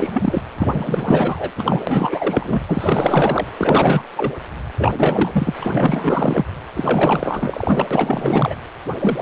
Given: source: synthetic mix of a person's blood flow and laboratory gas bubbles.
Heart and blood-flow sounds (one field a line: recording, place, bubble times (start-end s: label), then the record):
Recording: Doppler ultrasound of blood flow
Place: precordium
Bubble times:
0.00-0.43 s: bubbles
0.56-1.52 s: bubbles
1.57-1.82 s: bubbles
1.87-2.62 s: bubbles
2.68-3.46 s: bubbles
3.57-4.02 s: bubbles
4.16-4.32 s: bubbles
4.79-4.92 s: bubbles
4.97-5.54 s: bubbles
5.61-6.44 s: bubbles
6.74-7.86 s: bubbles
7.91-8.56 s: bubbles
9.00-9.22 s: bubbles
From the record:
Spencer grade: 4 (maximum detectable bubble signal sounding continuously throughout systole and diastole of every cardiac period, and overriding the amplitude of the normal cardiac signals)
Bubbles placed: anywhere in the cardiac cycle